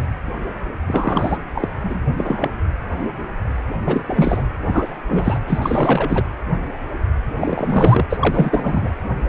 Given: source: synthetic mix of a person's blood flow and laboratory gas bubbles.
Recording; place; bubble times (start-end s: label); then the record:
Doppler ultrasound of blood flow; precordium
0.86-1.38 s: bubbles
1.55-1.68 s: bubbles
1.82-2.00 s: bubbles
2.17-2.50 s: bubbles
3.85-4.42 s: bubbles
4.62-4.98 s: bubbles
5.08-5.39 s: bubbles
5.47-6.26 s: bubbles
7.36-8.05 s: bubbles
8.10-8.88 s: bubbles
From the record:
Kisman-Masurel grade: 333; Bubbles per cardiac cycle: rolling drumbeat, 9 or more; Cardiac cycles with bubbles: 50 to 99%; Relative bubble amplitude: loud (0.450 to 0.775); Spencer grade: 3 (all of the cardiac periods contain showers or single bubble signals, but not dominating or overriding the cardiac motion signals); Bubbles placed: anywhere in the cardiac cycle